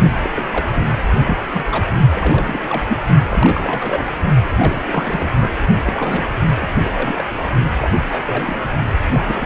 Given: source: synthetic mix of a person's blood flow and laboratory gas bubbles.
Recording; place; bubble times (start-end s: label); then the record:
Doppler ultrasound of blood flow; precordium
0.23-0.30 s: bubbles
0.34-0.47 s: bubbles
0.52-0.70 s: bubbles
0.75-0.98 s: bubbles
1.25-1.39 s: bubbles
1.53-1.94 s: bubbles
2.14-2.85 s: bubbles
2.88-2.99 s: bubbles
3.29-4.16 s: bubbles
4.58-5.50 s: bubbles
5.84-6.33 s: bubbles
6.61-6.67 s: bubbles
6.84-6.91 s: bubbles
6.94-7.25 s: bubbles
7.77-7.90 s: bubbles
7.99-8.04 s: bubbles
8.09-8.66 s: bubbles
9.10-9.46 s: bubbles
From the record:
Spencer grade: 3 (all of the cardiac periods contain showers or single bubble signals, but not dominating or overriding the cardiac motion signals); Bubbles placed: only in the low amplitude regions of the cardiac cycle